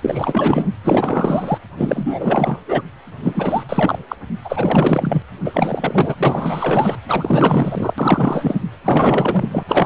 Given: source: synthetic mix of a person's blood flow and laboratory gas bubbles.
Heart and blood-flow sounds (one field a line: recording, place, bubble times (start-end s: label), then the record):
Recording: Doppler ultrasound of blood flow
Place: precordium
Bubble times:
0.00-0.70 s: bubbles
0.84-1.58 s: bubbles
1.77-2.59 s: bubbles
2.67-2.83 s: bubbles
3.22-3.98 s: bubbles
4.08-4.16 s: bubbles
4.45-5.22 s: bubbles
5.45-6.96 s: bubbles
7.07-7.94 s: bubbles
7.98-8.55 s: bubbles
8.84-9.63 s: bubbles
9.68-9.86 s: bubbles
From the record:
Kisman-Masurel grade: 444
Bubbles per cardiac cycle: continuous sound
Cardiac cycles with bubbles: 100%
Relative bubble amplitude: maximal (0.775 to 0.999)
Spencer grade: 4 (maximum detectable bubble signal sounding continuously throughout systole and diastole of every cardiac period, and overriding the amplitude of the normal cardiac signals)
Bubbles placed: anywhere in the cardiac cycle